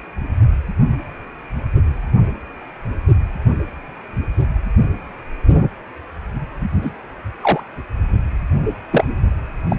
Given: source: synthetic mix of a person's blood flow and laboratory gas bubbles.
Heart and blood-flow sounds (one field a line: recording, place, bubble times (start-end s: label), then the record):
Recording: Doppler ultrasound of blood flow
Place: precordium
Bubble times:
6.82-6.92 s: bubbles
7.42-7.61 s: bubbles
8.91-9.04 s: bubbles
9.70-9.76 s: bubbles
From the record:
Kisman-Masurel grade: 122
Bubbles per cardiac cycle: 1 to 2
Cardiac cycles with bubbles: 10 to 50%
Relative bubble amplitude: moderate (0.250 to 0.450)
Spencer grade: 2 (many but less than half of the cardiac periods contain bubble signals, singularly or in groups)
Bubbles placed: only in the low amplitude regions of the cardiac cycle